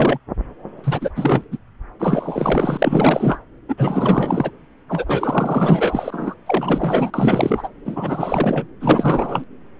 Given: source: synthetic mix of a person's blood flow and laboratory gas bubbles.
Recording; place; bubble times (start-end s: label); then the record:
Doppler ultrasound of blood flow; subclavian vein
0.00-0.18 s: bubbles
0.83-1.10 s: bubbles
1.16-1.44 s: bubbles
1.51-1.57 s: bubbles
1.99-3.40 s: bubbles
3.68-4.51 s: bubbles
4.88-6.35 s: bubbles
6.46-7.10 s: bubbles
7.13-7.68 s: bubbles
7.85-8.67 s: bubbles
8.80-9.44 s: bubbles
From the record:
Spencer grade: 4 (maximum detectable bubble signal sounding continuously throughout systole and diastole of every cardiac period, and overriding the amplitude of the normal cardiac signals); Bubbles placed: anywhere in the cardiac cycle